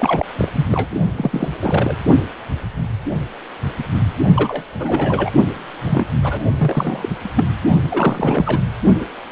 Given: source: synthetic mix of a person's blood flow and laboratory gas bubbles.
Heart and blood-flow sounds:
Doppler ultrasound of blood flow; precordium
0.00-0.26 s: bubbles
0.38-0.49 s: bubbles
0.54-0.67 s: bubbles
0.72-0.88 s: bubbles
1.16-1.49 s: bubbles
1.61-1.97 s: bubbles
4.35-4.63 s: bubbles
4.79-5.31 s: bubbles
5.82-6.12 s: bubbles
6.22-6.45 s: bubbles
6.57-7.09 s: bubbles
7.36-7.45 s: bubbles
7.89-8.59 s: bubbles
9.00-9.06 s: bubbles
From the record:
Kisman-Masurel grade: 232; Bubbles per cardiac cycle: several, 3 to 8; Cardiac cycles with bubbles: 50 to 99%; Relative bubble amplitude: moderate (0.250 to 0.450); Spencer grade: 3 (all of the cardiac periods contain showers or single bubble signals, but not dominating or overriding the cardiac motion signals); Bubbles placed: only in the low amplitude regions of the cardiac cycle

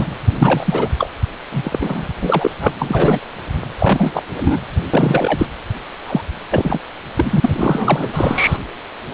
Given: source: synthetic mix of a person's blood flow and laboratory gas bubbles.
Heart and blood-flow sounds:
Doppler ultrasound of blood flow; precordium
0.00-0.06 s: bubbles
0.39-0.89 s: bubbles
0.98-1.11 s: bubbles
1.51-2.08 s: bubbles
2.21-2.51 s: bubbles
2.59-2.72 s: bubbles
2.79-3.21 s: bubbles
3.79-4.22 s: bubbles
4.40-4.59 s: bubbles
4.93-5.46 s: bubbles
6.07-6.21 s: bubbles
6.50-6.79 s: bubbles
7.15-8.57 s: bubbles
From the record:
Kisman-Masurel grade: 333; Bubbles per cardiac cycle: rolling drumbeat, 9 or more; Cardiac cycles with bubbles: 50 to 99%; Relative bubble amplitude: loud (0.450 to 0.775); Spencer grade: 3 (all of the cardiac periods contain showers or single bubble signals, but not dominating or overriding the cardiac motion signals); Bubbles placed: anywhere in the cardiac cycle

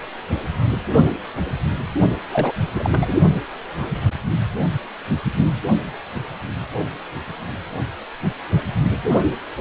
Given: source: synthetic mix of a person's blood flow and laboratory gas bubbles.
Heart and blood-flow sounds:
Doppler ultrasound of blood flow; precordium
2.31-2.52 s: bubbles
2.74-3.16 s: bubbles
From the record:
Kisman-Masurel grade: 212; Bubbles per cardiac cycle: several, 3 to 8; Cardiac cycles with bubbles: 1 to 10%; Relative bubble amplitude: moderate (0.250 to 0.450); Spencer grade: 1 (occasional bubble signal discernible with the cardiac motion signal, with majority of cardiac periods free of bubbles); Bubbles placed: only in the low amplitude regions of the cardiac cycle

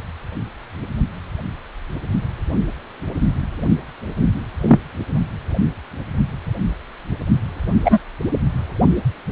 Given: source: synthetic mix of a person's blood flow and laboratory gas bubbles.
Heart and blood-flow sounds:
Doppler ultrasound of blood flow; precordium
4.62-4.79 s: bubbles
7.84-7.99 s: bubbles
From the record:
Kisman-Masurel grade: 123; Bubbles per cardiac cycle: 1 to 2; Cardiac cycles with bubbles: 10 to 50%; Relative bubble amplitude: loud (0.450 to 0.775); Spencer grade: 2 (many but less than half of the cardiac periods contain bubble signals, singularly or in groups); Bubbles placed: anywhere in the cardiac cycle

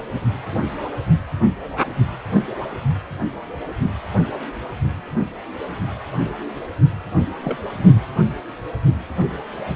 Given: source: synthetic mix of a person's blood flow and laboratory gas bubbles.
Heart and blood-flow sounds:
Doppler ultrasound of blood flow; precordium
7.41-7.58 s: bubbles
From the record:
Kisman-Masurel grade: 111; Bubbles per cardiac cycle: 1 to 2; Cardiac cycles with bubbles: 1 to 10%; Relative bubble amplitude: barely perceptible (0.100 to 0.250); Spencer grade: 1 (occasional bubble signal discernible with the cardiac motion signal, with majority of cardiac periods free of bubbles); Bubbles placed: anywhere in the cardiac cycle

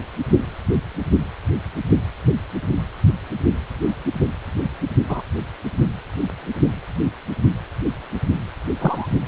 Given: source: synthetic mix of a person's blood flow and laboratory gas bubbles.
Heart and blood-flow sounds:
Doppler ultrasound of blood flow; precordium
5.08-5.22 s: bubbles
8.79-9.07 s: bubbles
From the record:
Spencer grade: 2 (many but less than half of the cardiac periods contain bubble signals, singularly or in groups); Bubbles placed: only in the low amplitude regions of the cardiac cycle

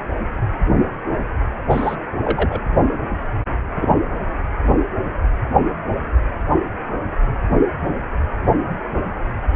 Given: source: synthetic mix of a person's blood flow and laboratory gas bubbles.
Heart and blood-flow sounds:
Doppler ultrasound of blood flow; precordium
1.70-1.96 s: bubbles
2.24-2.60 s: bubbles
3.75-3.94 s: bubbles
From the record:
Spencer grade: 2 (many but less than half of the cardiac periods contain bubble signals, singularly or in groups); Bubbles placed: anywhere in the cardiac cycle

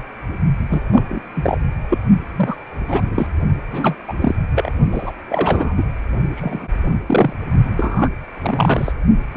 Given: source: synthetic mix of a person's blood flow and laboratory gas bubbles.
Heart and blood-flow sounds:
Doppler ultrasound of blood flow; precordium
0.70-0.82 s: bubbles
0.91-1.04 s: bubbles
1.08-1.22 s: bubbles
1.35-1.58 s: bubbles
1.90-1.98 s: bubbles
2.35-2.55 s: bubbles
2.87-3.29 s: bubbles
3.70-3.98 s: bubbles
4.08-4.12 s: bubbles
4.21-4.35 s: bubbles
4.53-4.70 s: bubbles
4.92-5.12 s: bubbles
5.29-5.75 s: bubbles
5.78-5.83 s: bubbles
6.35-6.68 s: bubbles
6.86-6.94 s: bubbles
7.07-7.33 s: bubbles
7.77-8.09 s: bubbles
8.41-8.92 s: bubbles
9.34-9.36 s: bubbles
From the record:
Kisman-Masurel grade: 242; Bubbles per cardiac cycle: several, 3 to 8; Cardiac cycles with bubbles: 100%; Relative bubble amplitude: moderate (0.250 to 0.450); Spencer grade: 3 (all of the cardiac periods contain showers or single bubble signals, but not dominating or overriding the cardiac motion signals); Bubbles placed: only in the low amplitude regions of the cardiac cycle

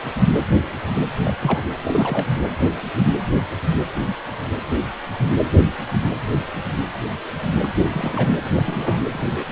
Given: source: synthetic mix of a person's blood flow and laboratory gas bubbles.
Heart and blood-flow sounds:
Doppler ultrasound of blood flow; precordium
1.24-1.37 s: bubbles
1.41-1.63 s: bubbles
1.81-2.40 s: bubbles
7.62-7.68 s: bubbles
7.82-8.29 s: bubbles
8.38-8.50 s: bubbles
8.55-9.02 s: bubbles
9.12-9.46 s: bubbles
From the record:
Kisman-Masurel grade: 221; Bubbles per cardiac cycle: several, 3 to 8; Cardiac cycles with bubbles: 10 to 50%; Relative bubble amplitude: barely perceptible (0.100 to 0.250); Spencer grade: 2 (many but less than half of the cardiac periods contain bubble signals, singularly or in groups); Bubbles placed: anywhere in the cardiac cycle

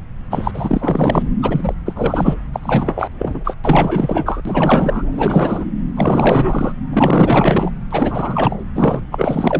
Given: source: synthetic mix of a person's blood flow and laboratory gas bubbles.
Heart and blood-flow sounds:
Doppler ultrasound of blood flow; subclavian vein
0.30-1.23 s: bubbles
1.42-1.75 s: bubbles
1.86-2.37 s: bubbles
2.53-2.59 s: bubbles
2.62-3.11 s: bubbles
3.18-3.42 s: bubbles
3.44-3.55 s: bubbles
3.64-4.42 s: bubbles
4.45-5.02 s: bubbles
5.11-5.66 s: bubbles
5.95-6.72 s: bubbles
6.93-7.71 s: bubbles
7.91-8.56 s: bubbles
8.75-9.02 s: bubbles
9.11-9.60 s: bubbles
From the record:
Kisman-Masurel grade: 444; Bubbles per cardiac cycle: continuous sound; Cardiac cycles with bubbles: 100%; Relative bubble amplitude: maximal (0.775 to 0.999); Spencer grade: 4 (maximum detectable bubble signal sounding continuously throughout systole and diastole of every cardiac period, and overriding the amplitude of the normal cardiac signals); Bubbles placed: anywhere in the cardiac cycle

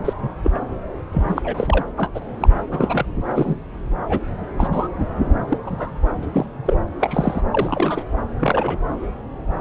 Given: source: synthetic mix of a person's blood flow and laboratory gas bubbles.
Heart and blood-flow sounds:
Doppler ultrasound of blood flow; subclavian vein
0.05-0.13 s: bubbles
0.18-0.28 s: bubbles
0.43-0.51 s: bubbles
0.54-0.59 s: bubbles
1.11-1.54 s: bubbles
1.57-1.85 s: bubbles
1.96-2.12 s: bubbles
2.15-2.20 s: bubbles
2.40-2.49 s: bubbles
2.71-3.06 s: bubbles
3.35-3.58 s: bubbles
4.09-4.20 s: bubbles
4.58-4.67 s: bubbles
4.71-4.88 s: bubbles
5.49-5.58 s: bubbles
5.65-5.93 s: bubbles
6.22-6.25 s: bubbles
6.33-6.46 s: bubbles
6.65-6.76 s: bubbles
7.00-7.41 s: bubbles
7.51-8.04 s: bubbles
8.39-8.79 s: bubbles
From the record:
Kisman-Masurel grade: 232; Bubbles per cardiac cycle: several, 3 to 8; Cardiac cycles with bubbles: 50 to 99%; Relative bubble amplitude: moderate (0.250 to 0.450); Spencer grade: 3 (all of the cardiac periods contain showers or single bubble signals, but not dominating or overriding the cardiac motion signals); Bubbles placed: anywhere in the cardiac cycle

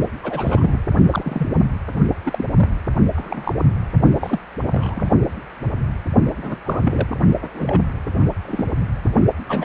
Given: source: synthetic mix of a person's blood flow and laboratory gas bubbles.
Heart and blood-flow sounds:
Doppler ultrasound of blood flow; precordium
0.02-0.08 s: bubbles
0.23-0.79 s: bubbles
1.10-1.49 s: bubbles
2.25-2.45 s: bubbles
2.56-2.70 s: bubbles
3.16-3.53 s: bubbles
4.21-4.40 s: bubbles
4.58-5.08 s: bubbles
6.42-6.60 s: bubbles
6.66-6.81 s: bubbles
6.85-7.20 s: bubbles
7.42-7.49 s: bubbles
7.54-7.82 s: bubbles
8.45-8.71 s: bubbles
9.47-9.65 s: bubbles
From the record:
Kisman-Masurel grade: 232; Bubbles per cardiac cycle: several, 3 to 8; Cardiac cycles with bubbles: 50 to 99%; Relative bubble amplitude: moderate (0.250 to 0.450); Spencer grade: 3 (all of the cardiac periods contain showers or single bubble signals, but not dominating or overriding the cardiac motion signals); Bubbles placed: only in the low amplitude regions of the cardiac cycle

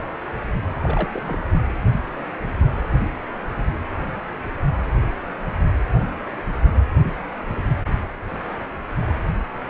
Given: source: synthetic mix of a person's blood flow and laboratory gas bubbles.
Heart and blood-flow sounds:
Doppler ultrasound of blood flow; precordium
0.82-1.09 s: bubbles
1.13-1.49 s: bubbles
1.52-1.60 s: bubbles
From the record:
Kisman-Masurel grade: 211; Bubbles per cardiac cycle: several, 3 to 8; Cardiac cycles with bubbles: 1 to 10%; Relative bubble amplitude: barely perceptible (0.100 to 0.250); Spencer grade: 1 (occasional bubble signal discernible with the cardiac motion signal, with majority of cardiac periods free of bubbles); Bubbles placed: anywhere in the cardiac cycle

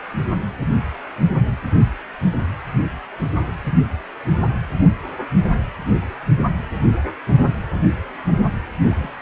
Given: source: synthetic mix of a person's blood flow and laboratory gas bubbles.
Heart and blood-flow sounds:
Doppler ultrasound of blood flow; precordium
8.81-9.11 s: bubbles
From the record:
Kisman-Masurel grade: 111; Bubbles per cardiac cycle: 1 to 2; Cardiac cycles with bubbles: 1 to 10%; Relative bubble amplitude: barely perceptible (0.100 to 0.250); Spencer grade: 1 (occasional bubble signal discernible with the cardiac motion signal, with majority of cardiac periods free of bubbles); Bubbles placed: only in the low amplitude regions of the cardiac cycle

